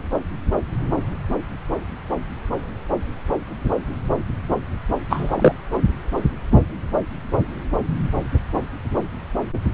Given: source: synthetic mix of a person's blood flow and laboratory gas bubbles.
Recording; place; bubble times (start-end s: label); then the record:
Doppler ultrasound of blood flow; subclavian vein
5.10-5.34 s: bubbles
5.38-5.53 s: bubbles
From the record:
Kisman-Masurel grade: 113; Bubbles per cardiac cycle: 1 to 2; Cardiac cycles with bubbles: 1 to 10%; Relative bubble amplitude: loud (0.450 to 0.775); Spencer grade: 1 (occasional bubble signal discernible with the cardiac motion signal, with majority of cardiac periods free of bubbles); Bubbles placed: anywhere in the cardiac cycle